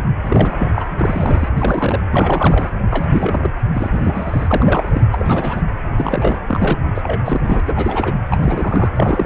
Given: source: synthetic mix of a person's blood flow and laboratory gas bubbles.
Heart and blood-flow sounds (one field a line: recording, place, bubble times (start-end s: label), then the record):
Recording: Doppler ultrasound of blood flow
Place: precordium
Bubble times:
0.22-0.71 s: bubbles
0.74-0.83 s: bubbles
0.99-1.49 s: bubbles
1.55-2.00 s: bubbles
2.11-2.70 s: bubbles
2.90-3.52 s: bubbles
3.73-5.08 s: bubbles
5.12-5.62 s: bubbles
5.98-6.40 s: bubbles
6.48-6.78 s: bubbles
6.95-7.20 s: bubbles
7.25-7.61 s: bubbles
7.67-8.12 s: bubbles
8.30-8.91 s: bubbles
8.94-9.25 s: bubbles
From the record:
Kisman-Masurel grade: 342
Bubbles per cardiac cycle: rolling drumbeat, 9 or more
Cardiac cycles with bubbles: 100%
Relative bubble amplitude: moderate (0.250 to 0.450)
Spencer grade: 3 (all of the cardiac periods contain showers or single bubble signals, but not dominating or overriding the cardiac motion signals)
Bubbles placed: anywhere in the cardiac cycle